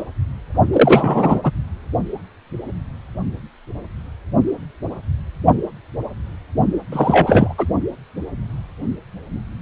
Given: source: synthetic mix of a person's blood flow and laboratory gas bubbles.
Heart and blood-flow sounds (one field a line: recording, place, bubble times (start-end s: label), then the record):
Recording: Doppler ultrasound of blood flow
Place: precordium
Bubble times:
0.00-0.04 s: bubbles
0.72-1.41 s: bubbles
1.43-1.51 s: bubbles
6.92-7.54 s: bubbles
7.58-7.67 s: bubbles
From the record:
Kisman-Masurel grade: 223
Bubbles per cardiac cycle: several, 3 to 8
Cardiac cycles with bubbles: 10 to 50%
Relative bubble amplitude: loud (0.450 to 0.775)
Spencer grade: 2 (many but less than half of the cardiac periods contain bubble signals, singularly or in groups)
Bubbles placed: only in the low amplitude regions of the cardiac cycle